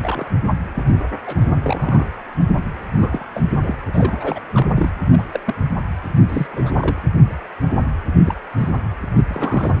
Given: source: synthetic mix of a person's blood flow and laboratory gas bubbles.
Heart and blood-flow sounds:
Doppler ultrasound of blood flow; precordium
0.02-0.24 s: bubbles
0.74-0.83 s: bubbles
1.25-1.48 s: bubbles
1.62-2.07 s: bubbles
2.93-3.26 s: bubbles
3.34-3.43 s: bubbles
3.62-3.75 s: bubbles
3.93-4.40 s: bubbles
4.54-4.67 s: bubbles
4.75-4.91 s: bubbles
5.12-5.23 s: bubbles
5.33-5.40 s: bubbles
5.45-5.54 s: bubbles
6.29-6.46 s: bubbles
6.52-7.02 s: bubbles
8.26-8.34 s: bubbles
8.57-8.69 s: bubbles
9.15-9.24 s: bubbles
9.28-9.74 s: bubbles
From the record:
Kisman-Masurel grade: 232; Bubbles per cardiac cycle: several, 3 to 8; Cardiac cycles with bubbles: 50 to 99%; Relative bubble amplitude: moderate (0.250 to 0.450); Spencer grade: 3 (all of the cardiac periods contain showers or single bubble signals, but not dominating or overriding the cardiac motion signals); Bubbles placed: anywhere in the cardiac cycle

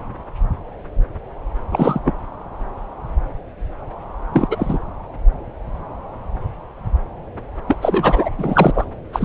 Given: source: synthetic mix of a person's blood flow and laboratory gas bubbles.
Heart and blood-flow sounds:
Doppler ultrasound of blood flow; subclavian vein
1.71-2.00 s: bubbles
2.04-2.13 s: bubbles
4.33-4.48 s: bubbles
4.50-4.78 s: bubbles
7.67-7.78 s: bubbles
7.81-8.29 s: bubbles
8.38-8.85 s: bubbles
9.13-9.25 s: bubbles
From the record:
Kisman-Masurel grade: 223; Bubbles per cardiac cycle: several, 3 to 8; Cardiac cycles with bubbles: 10 to 50%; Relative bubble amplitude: loud (0.450 to 0.775); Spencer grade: 2 (many but less than half of the cardiac periods contain bubble signals, singularly or in groups); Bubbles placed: anywhere in the cardiac cycle

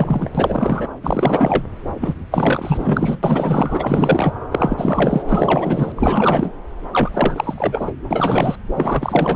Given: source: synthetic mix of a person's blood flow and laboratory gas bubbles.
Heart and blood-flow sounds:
Doppler ultrasound of blood flow; subclavian vein
0.00-0.30 s: bubbles
0.34-0.87 s: bubbles
1.02-1.63 s: bubbles
2.01-2.14 s: bubbles
2.31-3.19 s: bubbles
3.23-4.33 s: bubbles
4.51-5.22 s: bubbles
5.27-5.92 s: bubbles
5.96-6.53 s: bubbles
6.92-7.92 s: bubbles
8.10-8.55 s: bubbles
8.74-9.36 s: bubbles
From the record:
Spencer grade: 4 (maximum detectable bubble signal sounding continuously throughout systole and diastole of every cardiac period, and overriding the amplitude of the normal cardiac signals); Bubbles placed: anywhere in the cardiac cycle

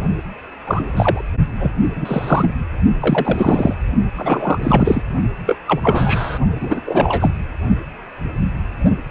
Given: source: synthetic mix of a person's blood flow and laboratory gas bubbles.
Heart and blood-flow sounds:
Doppler ultrasound of blood flow; precordium
0.67-1.22 s: bubbles
1.59-1.72 s: bubbles
1.95-2.53 s: bubbles
3.00-3.75 s: bubbles
4.16-5.02 s: bubbles
5.46-5.58 s: bubbles
5.67-5.80 s: bubbles
5.83-6.38 s: bubbles
6.60-6.80 s: bubbles
6.85-7.30 s: bubbles
From the record:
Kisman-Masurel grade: 243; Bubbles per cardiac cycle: several, 3 to 8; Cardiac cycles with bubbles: 100%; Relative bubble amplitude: loud (0.450 to 0.775); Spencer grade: 3 (all of the cardiac periods contain showers or single bubble signals, but not dominating or overriding the cardiac motion signals); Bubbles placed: only in the low amplitude regions of the cardiac cycle

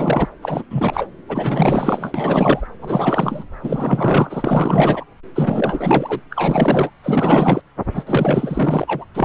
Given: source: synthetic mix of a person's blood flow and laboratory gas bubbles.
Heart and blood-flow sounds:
Doppler ultrasound of blood flow; subclavian vein
0.00-0.29 s: bubbles
0.42-0.63 s: bubbles
0.70-1.07 s: bubbles
1.28-2.67 s: bubbles
2.81-3.44 s: bubbles
3.62-5.04 s: bubbles
5.35-6.21 s: bubbles
6.30-6.90 s: bubbles
7.03-7.62 s: bubbles
7.94-8.04 s: bubbles
8.07-9.04 s: bubbles
9.14-9.25 s: bubbles
From the record:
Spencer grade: 4 (maximum detectable bubble signal sounding continuously throughout systole and diastole of every cardiac period, and overriding the amplitude of the normal cardiac signals); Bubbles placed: anywhere in the cardiac cycle

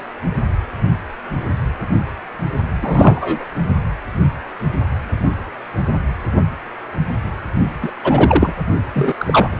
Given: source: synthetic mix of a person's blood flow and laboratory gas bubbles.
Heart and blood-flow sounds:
Doppler ultrasound of blood flow; precordium
2.81-3.45 s: bubbles
7.82-7.91 s: bubbles
8.04-8.55 s: bubbles
8.95-9.13 s: bubbles
9.18-9.56 s: bubbles
From the record:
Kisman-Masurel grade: 223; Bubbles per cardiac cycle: several, 3 to 8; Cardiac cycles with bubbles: 10 to 50%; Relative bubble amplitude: loud (0.450 to 0.775); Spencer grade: 2 (many but less than half of the cardiac periods contain bubble signals, singularly or in groups); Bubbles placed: only in the low amplitude regions of the cardiac cycle

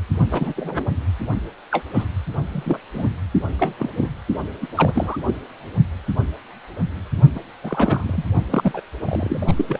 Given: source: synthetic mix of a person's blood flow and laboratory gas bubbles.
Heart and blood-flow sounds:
Doppler ultrasound of blood flow; precordium
0.30-0.53 s: bubbles
0.56-0.91 s: bubbles
1.71-1.83 s: bubbles
1.93-2.04 s: bubbles
2.52-2.80 s: bubbles
2.94-3.08 s: bubbles
3.58-3.74 s: bubbles
3.78-4.09 s: bubbles
4.61-4.66 s: bubbles
4.76-5.18 s: bubbles
5.26-5.34 s: bubbles
7.35-7.40 s: bubbles
7.63-8.24 s: bubbles
8.50-8.80 s: bubbles
8.99-9.53 s: bubbles
9.56-9.65 s: bubbles
9.68-9.79 s: bubbles
From the record:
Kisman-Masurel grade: 232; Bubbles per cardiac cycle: several, 3 to 8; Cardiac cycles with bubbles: 50 to 99%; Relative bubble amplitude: moderate (0.250 to 0.450); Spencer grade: 3 (all of the cardiac periods contain showers or single bubble signals, but not dominating or overriding the cardiac motion signals); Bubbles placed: only in the low amplitude regions of the cardiac cycle

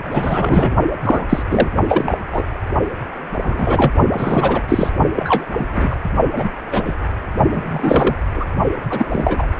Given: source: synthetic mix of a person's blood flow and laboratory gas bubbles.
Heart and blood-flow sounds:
Doppler ultrasound of blood flow; precordium
0.10-0.75 s: bubbles
1.01-1.25 s: bubbles
1.29-1.43 s: bubbles
1.50-1.69 s: bubbles
1.87-2.18 s: bubbles
2.32-2.43 s: bubbles
3.43-3.93 s: bubbles
4.11-4.62 s: bubbles
4.68-4.90 s: bubbles
5.16-5.45 s: bubbles
5.58-5.96 s: bubbles
6.36-6.52 s: bubbles
6.71-6.95 s: bubbles
7.52-8.15 s: bubbles
8.36-8.46 s: bubbles
8.82-9.46 s: bubbles
From the record:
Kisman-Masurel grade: 243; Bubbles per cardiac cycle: several, 3 to 8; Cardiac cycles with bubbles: 100%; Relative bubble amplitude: loud (0.450 to 0.775); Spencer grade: 3 (all of the cardiac periods contain showers or single bubble signals, but not dominating or overriding the cardiac motion signals); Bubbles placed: only in the low amplitude regions of the cardiac cycle

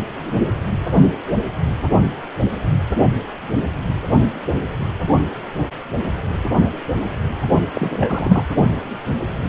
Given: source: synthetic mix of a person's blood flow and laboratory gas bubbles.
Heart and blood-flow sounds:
Doppler ultrasound of blood flow; precordium
7.74-8.46 s: bubbles
From the record:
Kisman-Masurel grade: 212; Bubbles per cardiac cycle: several, 3 to 8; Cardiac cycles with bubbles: 1 to 10%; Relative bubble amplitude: moderate (0.250 to 0.450); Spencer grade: 1 (occasional bubble signal discernible with the cardiac motion signal, with majority of cardiac periods free of bubbles); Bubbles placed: anywhere in the cardiac cycle

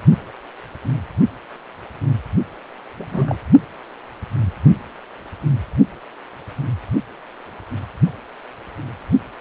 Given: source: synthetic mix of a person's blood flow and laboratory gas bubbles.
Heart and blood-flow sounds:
Doppler ultrasound of blood flow; precordium
2.96-3.37 s: bubbles
From the record:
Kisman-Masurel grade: 122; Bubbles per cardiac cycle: 1 to 2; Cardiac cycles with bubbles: 10 to 50%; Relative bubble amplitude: moderate (0.250 to 0.450); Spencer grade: 2 (many but less than half of the cardiac periods contain bubble signals, singularly or in groups); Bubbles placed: only in the low amplitude regions of the cardiac cycle

